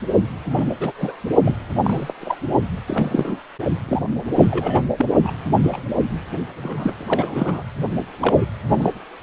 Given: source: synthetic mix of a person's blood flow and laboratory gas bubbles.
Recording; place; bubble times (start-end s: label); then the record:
Doppler ultrasound of blood flow; precordium
0.45-0.75 s: bubbles
0.79-0.92 s: bubbles
0.98-1.14 s: bubbles
1.43-1.57 s: bubbles
1.84-2.12 s: bubbles
2.21-2.36 s: bubbles
2.87-3.39 s: bubbles
3.88-4.02 s: bubbles
4.35-4.83 s: bubbles
4.98-5.05 s: bubbles
5.23-5.31 s: bubbles
5.63-5.84 s: bubbles
5.97-6.05 s: bubbles
6.62-7.63 s: bubbles
8.21-8.45 s: bubbles
8.69-8.89 s: bubbles
From the record:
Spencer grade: 3 (all of the cardiac periods contain showers or single bubble signals, but not dominating or overriding the cardiac motion signals); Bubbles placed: only in the low amplitude regions of the cardiac cycle